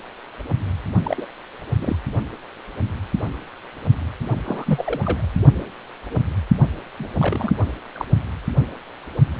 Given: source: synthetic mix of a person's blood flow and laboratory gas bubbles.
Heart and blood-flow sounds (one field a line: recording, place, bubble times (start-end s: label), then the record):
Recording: Doppler ultrasound of blood flow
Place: precordium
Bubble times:
1.03-1.26 s: bubbles
1.80-1.96 s: bubbles
4.46-5.27 s: bubbles
6.99-7.07 s: bubbles
7.18-7.56 s: bubbles
7.94-8.05 s: bubbles
From the record:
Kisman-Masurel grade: 222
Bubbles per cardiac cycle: several, 3 to 8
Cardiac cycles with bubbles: 10 to 50%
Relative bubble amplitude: moderate (0.250 to 0.450)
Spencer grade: 2 (many but less than half of the cardiac periods contain bubble signals, singularly or in groups)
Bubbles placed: only in the low amplitude regions of the cardiac cycle